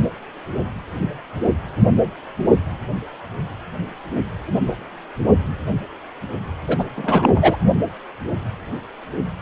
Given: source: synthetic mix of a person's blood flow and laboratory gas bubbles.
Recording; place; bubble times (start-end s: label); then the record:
Doppler ultrasound of blood flow; precordium
6.67-6.84 s: bubbles
6.96-7.57 s: bubbles
From the record:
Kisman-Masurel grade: 223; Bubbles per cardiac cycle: several, 3 to 8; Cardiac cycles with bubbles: 10 to 50%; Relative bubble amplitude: loud (0.450 to 0.775); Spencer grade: 2 (many but less than half of the cardiac periods contain bubble signals, singularly or in groups); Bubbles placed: only in the low amplitude regions of the cardiac cycle